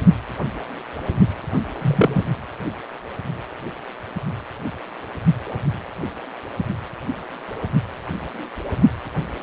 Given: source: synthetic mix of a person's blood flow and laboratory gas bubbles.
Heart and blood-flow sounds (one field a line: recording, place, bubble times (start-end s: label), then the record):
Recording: Doppler ultrasound of blood flow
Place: precordium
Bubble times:
1.81-2.24 s: bubbles
From the record:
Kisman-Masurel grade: 113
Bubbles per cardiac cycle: 1 to 2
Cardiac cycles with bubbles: 1 to 10%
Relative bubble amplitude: loud (0.450 to 0.775)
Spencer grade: 1 (occasional bubble signal discernible with the cardiac motion signal, with majority of cardiac periods free of bubbles)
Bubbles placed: only in the low amplitude regions of the cardiac cycle